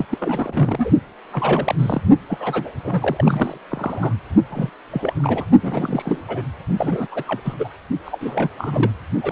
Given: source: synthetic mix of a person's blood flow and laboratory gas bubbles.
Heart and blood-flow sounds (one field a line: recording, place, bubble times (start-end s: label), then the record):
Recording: Doppler ultrasound of blood flow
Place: precordium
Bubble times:
0.00-0.05 s: bubbles
0.10-0.91 s: bubbles
1.32-1.75 s: bubbles
1.78-2.02 s: bubbles
2.29-2.71 s: bubbles
2.83-3.58 s: bubbles
3.68-4.13 s: bubbles
4.50-4.70 s: bubbles
4.92-5.13 s: bubbles
5.15-5.46 s: bubbles
5.62-6.24 s: bubbles
6.28-6.42 s: bubbles
6.78-7.08 s: bubbles
7.12-7.23 s: bubbles
7.27-7.40 s: bubbles
7.44-7.54 s: bubbles
7.58-7.68 s: bubbles
8.05-8.50 s: bubbles
8.58-8.91 s: bubbles
9.22-9.32 s: bubbles
From the record:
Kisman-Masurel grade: 342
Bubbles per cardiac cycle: rolling drumbeat, 9 or more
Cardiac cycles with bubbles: 100%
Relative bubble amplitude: moderate (0.250 to 0.450)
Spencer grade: 3 (all of the cardiac periods contain showers or single bubble signals, but not dominating or overriding the cardiac motion signals)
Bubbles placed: only in the low amplitude regions of the cardiac cycle